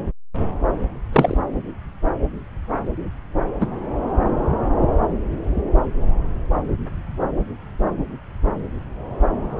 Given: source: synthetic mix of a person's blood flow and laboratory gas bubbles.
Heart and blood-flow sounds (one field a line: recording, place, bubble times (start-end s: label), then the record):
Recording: Doppler ultrasound of blood flow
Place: subclavian vein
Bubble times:
1.12-1.38 s: bubbles
3.60-3.67 s: bubbles
From the record:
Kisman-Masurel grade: 123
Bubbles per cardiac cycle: 1 to 2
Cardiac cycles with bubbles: 10 to 50%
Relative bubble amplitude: loud (0.450 to 0.775)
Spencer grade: 2 (many but less than half of the cardiac periods contain bubble signals, singularly or in groups)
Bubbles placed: anywhere in the cardiac cycle